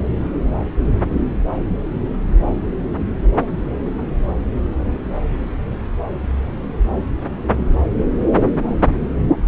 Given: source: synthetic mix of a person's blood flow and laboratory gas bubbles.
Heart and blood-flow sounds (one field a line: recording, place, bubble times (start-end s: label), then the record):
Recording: Doppler ultrasound of blood flow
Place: subclavian vein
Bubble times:
no bubbles
From the record:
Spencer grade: 0 (complete lack of bubble signals)